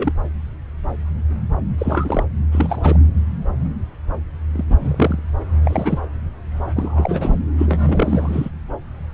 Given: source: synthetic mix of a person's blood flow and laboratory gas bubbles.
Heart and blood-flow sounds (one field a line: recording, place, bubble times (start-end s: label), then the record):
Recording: Doppler ultrasound of blood flow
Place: subclavian vein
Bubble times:
0.00-0.12 s: bubbles
1.78-2.23 s: bubbles
2.51-2.99 s: bubbles
4.54-4.65 s: bubbles
4.70-5.20 s: bubbles
5.63-5.99 s: bubbles
6.75-7.35 s: bubbles
7.58-8.49 s: bubbles
From the record:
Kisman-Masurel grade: 222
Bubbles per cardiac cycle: several, 3 to 8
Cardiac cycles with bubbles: 10 to 50%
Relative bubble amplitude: moderate (0.250 to 0.450)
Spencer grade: 2 (many but less than half of the cardiac periods contain bubble signals, singularly or in groups)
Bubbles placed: anywhere in the cardiac cycle